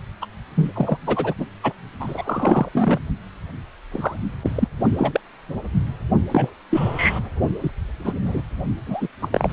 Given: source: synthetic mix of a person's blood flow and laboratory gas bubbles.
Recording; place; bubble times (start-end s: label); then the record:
Doppler ultrasound of blood flow; precordium
0.22-0.25 s: bubbles
0.56-0.97 s: bubbles
1.06-1.33 s: bubbles
1.38-1.45 s: bubbles
1.63-1.72 s: bubbles
2.00-2.69 s: bubbles
2.74-2.99 s: bubbles
3.92-4.19 s: bubbles
4.42-4.52 s: bubbles
4.55-4.68 s: bubbles
4.97-5.21 s: bubbles
6.31-6.54 s: bubbles
6.70-7.20 s: bubbles
7.61-7.71 s: bubbles
8.04-8.13 s: bubbles
8.25-8.42 s: bubbles
8.87-9.07 s: bubbles
9.22-9.28 s: bubbles
9.32-9.53 s: bubbles
From the record:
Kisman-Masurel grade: 232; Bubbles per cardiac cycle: several, 3 to 8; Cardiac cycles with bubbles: 50 to 99%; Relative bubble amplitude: moderate (0.250 to 0.450); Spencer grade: 3 (all of the cardiac periods contain showers or single bubble signals, but not dominating or overriding the cardiac motion signals); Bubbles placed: only in the low amplitude regions of the cardiac cycle